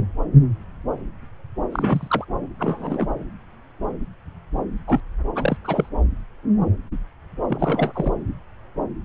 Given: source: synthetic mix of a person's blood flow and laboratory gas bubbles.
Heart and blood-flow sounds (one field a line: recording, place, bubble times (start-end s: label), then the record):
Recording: Doppler ultrasound of blood flow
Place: subclavian vein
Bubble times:
1.72-2.24 s: bubbles
2.59-3.07 s: bubbles
4.87-5.00 s: bubbles
5.35-5.57 s: bubbles
5.64-5.89 s: bubbles
7.47-8.13 s: bubbles
From the record:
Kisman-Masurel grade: 222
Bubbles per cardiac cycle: several, 3 to 8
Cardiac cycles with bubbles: 10 to 50%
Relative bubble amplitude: moderate (0.250 to 0.450)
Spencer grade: 2 (many but less than half of the cardiac periods contain bubble signals, singularly or in groups)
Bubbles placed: anywhere in the cardiac cycle